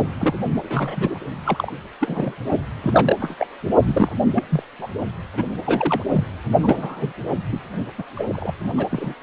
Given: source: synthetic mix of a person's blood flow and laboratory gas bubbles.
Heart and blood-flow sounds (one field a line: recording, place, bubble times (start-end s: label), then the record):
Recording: Doppler ultrasound of blood flow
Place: precordium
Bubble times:
0.19-0.34 s: bubbles
0.62-1.19 s: bubbles
1.44-1.72 s: bubbles
2.00-2.36 s: bubbles
2.83-3.16 s: bubbles
3.20-3.35 s: bubbles
3.39-3.47 s: bubbles
3.86-4.13 s: bubbles
4.34-4.44 s: bubbles
4.49-4.63 s: bubbles
4.79-4.88 s: bubbles
5.37-5.46 s: bubbles
5.64-6.04 s: bubbles
6.13-6.25 s: bubbles
6.60-7.13 s: bubbles
7.52-7.61 s: bubbles
7.98-8.03 s: bubbles
8.15-8.53 s: bubbles
8.77-8.87 s: bubbles
8.90-9.14 s: bubbles
From the record:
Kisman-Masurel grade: 242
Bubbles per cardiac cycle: several, 3 to 8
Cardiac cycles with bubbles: 100%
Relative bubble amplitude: moderate (0.250 to 0.450)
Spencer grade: 3 (all of the cardiac periods contain showers or single bubble signals, but not dominating or overriding the cardiac motion signals)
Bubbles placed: only in the low amplitude regions of the cardiac cycle